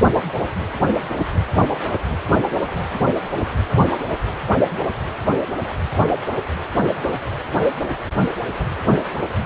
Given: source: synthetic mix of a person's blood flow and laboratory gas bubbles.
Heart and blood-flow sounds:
Doppler ultrasound of blood flow; precordium
no bubbles
From the record:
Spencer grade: 0 (complete lack of bubble signals)

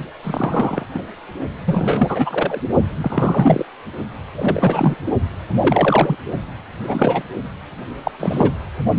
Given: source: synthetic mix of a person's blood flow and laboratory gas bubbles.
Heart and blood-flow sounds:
Doppler ultrasound of blood flow; precordium
0.23-0.85 s: bubbles
0.94-1.02 s: bubbles
1.65-2.61 s: bubbles
3.01-3.64 s: bubbles
4.35-4.96 s: bubbles
5.59-6.16 s: bubbles
6.87-7.22 s: bubbles
8.04-8.12 s: bubbles
8.20-8.50 s: bubbles
From the record:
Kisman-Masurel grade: 233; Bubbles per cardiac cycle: several, 3 to 8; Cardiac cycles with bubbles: 50 to 99%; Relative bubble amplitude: loud (0.450 to 0.775); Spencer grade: 3 (all of the cardiac periods contain showers or single bubble signals, but not dominating or overriding the cardiac motion signals); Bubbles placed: only in the low amplitude regions of the cardiac cycle

